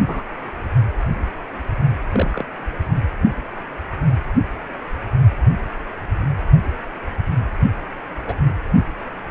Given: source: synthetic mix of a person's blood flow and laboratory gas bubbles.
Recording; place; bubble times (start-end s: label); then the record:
Doppler ultrasound of blood flow; precordium
0.07-0.23 s: bubbles
2.12-2.45 s: bubbles
8.27-8.33 s: bubbles
From the record:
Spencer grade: 2 (many but less than half of the cardiac periods contain bubble signals, singularly or in groups); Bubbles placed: anywhere in the cardiac cycle